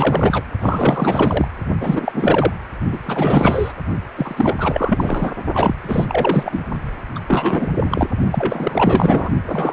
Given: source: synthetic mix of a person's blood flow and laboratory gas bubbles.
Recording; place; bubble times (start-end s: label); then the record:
Doppler ultrasound of blood flow; precordium
0.00-0.45 s: bubbles
0.60-1.48 s: bubbles
1.80-2.54 s: bubbles
2.92-2.99 s: bubbles
3.02-3.73 s: bubbles
4.16-5.35 s: bubbles
5.54-5.75 s: bubbles
5.83-6.06 s: bubbles
6.08-6.59 s: bubbles
7.15-7.20 s: bubbles
7.28-7.70 s: bubbles
7.76-8.07 s: bubbles
8.31-9.30 s: bubbles
9.45-9.73 s: bubbles
From the record:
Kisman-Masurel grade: 444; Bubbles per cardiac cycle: continuous sound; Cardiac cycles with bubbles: 100%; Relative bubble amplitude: maximal (0.775 to 0.999); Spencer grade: 4 (maximum detectable bubble signal sounding continuously throughout systole and diastole of every cardiac period, and overriding the amplitude of the normal cardiac signals); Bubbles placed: only in the low amplitude regions of the cardiac cycle